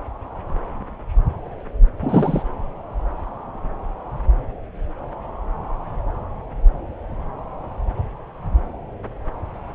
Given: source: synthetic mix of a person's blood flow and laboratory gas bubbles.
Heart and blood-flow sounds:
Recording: Doppler ultrasound of blood flow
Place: subclavian vein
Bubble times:
2.00-2.42 s: bubbles
From the record:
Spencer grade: 1 (occasional bubble signal discernible with the cardiac motion signal, with majority of cardiac periods free of bubbles)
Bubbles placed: anywhere in the cardiac cycle

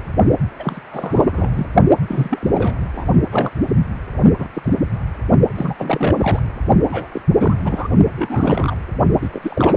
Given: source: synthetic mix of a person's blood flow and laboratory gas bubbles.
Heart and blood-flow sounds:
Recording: Doppler ultrasound of blood flow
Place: precordium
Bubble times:
0.59-0.80 s: bubbles
0.91-1.50 s: bubbles
1.55-1.67 s: bubbles
2.07-2.74 s: bubbles
2.94-3.07 s: bubbles
3.31-3.50 s: bubbles
4.23-4.33 s: bubbles
4.38-4.47 s: bubbles
4.53-4.73 s: bubbles
5.55-5.74 s: bubbles
5.79-6.40 s: bubbles
6.88-7.08 s: bubbles
7.12-7.21 s: bubbles
7.33-7.54 s: bubbles
7.61-7.87 s: bubbles
8.16-8.75 s: bubbles
9.21-9.29 s: bubbles
9.33-9.77 s: bubbles
From the record:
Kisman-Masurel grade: 342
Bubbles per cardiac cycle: rolling drumbeat, 9 or more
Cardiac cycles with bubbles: 100%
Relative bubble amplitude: moderate (0.250 to 0.450)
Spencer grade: 3 (all of the cardiac periods contain showers or single bubble signals, but not dominating or overriding the cardiac motion signals)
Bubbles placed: only in the low amplitude regions of the cardiac cycle

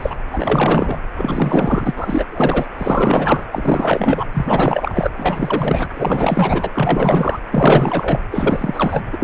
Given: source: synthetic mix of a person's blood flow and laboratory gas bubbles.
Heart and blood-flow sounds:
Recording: Doppler ultrasound of blood flow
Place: precordium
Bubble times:
0.00-0.16 s: bubbles
0.32-0.97 s: bubbles
1.14-1.94 s: bubbles
1.96-2.25 s: bubbles
2.31-2.67 s: bubbles
2.78-3.44 s: bubbles
3.52-4.25 s: bubbles
4.33-5.11 s: bubbles
5.17-5.89 s: bubbles
5.96-6.70 s: bubbles
6.74-7.40 s: bubbles
7.51-8.21 s: bubbles
8.31-9.04 s: bubbles
9.12-9.24 s: bubbles
From the record:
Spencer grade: 4 (maximum detectable bubble signal sounding continuously throughout systole and diastole of every cardiac period, and overriding the amplitude of the normal cardiac signals)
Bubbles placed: anywhere in the cardiac cycle

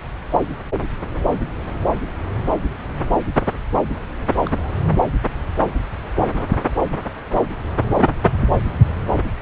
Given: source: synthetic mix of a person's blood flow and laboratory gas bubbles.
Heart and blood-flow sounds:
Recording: Doppler ultrasound of blood flow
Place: subclavian vein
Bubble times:
4.39-4.80 s: bubbles
From the record:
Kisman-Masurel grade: 111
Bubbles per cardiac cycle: 1 to 2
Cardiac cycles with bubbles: 1 to 10%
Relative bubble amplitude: barely perceptible (0.100 to 0.250)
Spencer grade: 1 (occasional bubble signal discernible with the cardiac motion signal, with majority of cardiac periods free of bubbles)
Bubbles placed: anywhere in the cardiac cycle

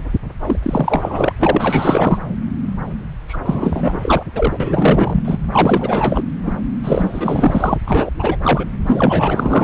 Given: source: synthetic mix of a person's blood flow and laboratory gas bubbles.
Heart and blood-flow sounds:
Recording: Doppler ultrasound of blood flow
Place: subclavian vein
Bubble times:
0.42-0.58 s: bubbles
0.62-1.32 s: bubbles
1.39-2.19 s: bubbles
3.28-3.38 s: bubbles
3.40-4.23 s: bubbles
4.35-4.57 s: bubbles
4.60-5.38 s: bubbles
5.52-6.24 s: bubbles
6.43-6.54 s: bubbles
6.83-7.78 s: bubbles
7.86-8.10 s: bubbles
8.18-8.37 s: bubbles
8.42-8.65 s: bubbles
8.84-9.63 s: bubbles
From the record:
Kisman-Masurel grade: 444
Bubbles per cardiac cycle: continuous sound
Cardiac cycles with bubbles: 100%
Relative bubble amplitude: maximal (0.775 to 0.999)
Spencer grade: 4 (maximum detectable bubble signal sounding continuously throughout systole and diastole of every cardiac period, and overriding the amplitude of the normal cardiac signals)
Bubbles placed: anywhere in the cardiac cycle

